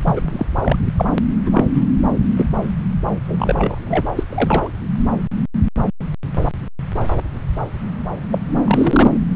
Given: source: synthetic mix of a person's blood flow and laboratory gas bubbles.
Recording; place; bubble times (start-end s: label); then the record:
Doppler ultrasound of blood flow; subclavian vein
0.03-0.46 s: bubbles
0.60-0.77 s: bubbles
0.96-1.08 s: bubbles
1.46-1.84 s: bubbles
2.37-2.46 s: bubbles
3.28-3.78 s: bubbles
3.86-4.11 s: bubbles
4.17-4.24 s: bubbles
4.29-4.68 s: bubbles
8.31-8.38 s: bubbles
8.64-9.18 s: bubbles
From the record:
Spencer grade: 3 (all of the cardiac periods contain showers or single bubble signals, but not dominating or overriding the cardiac motion signals); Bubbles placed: anywhere in the cardiac cycle